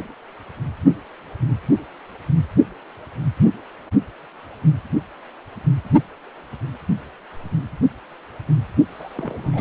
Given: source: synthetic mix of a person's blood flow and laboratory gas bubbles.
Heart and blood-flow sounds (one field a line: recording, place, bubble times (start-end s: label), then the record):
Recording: Doppler ultrasound of blood flow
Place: precordium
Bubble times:
8.91-9.61 s: bubbles
From the record:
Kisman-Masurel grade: 211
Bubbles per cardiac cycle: several, 3 to 8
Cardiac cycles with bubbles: 1 to 10%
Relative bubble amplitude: barely perceptible (0.100 to 0.250)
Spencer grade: 1 (occasional bubble signal discernible with the cardiac motion signal, with majority of cardiac periods free of bubbles)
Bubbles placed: only in the low amplitude regions of the cardiac cycle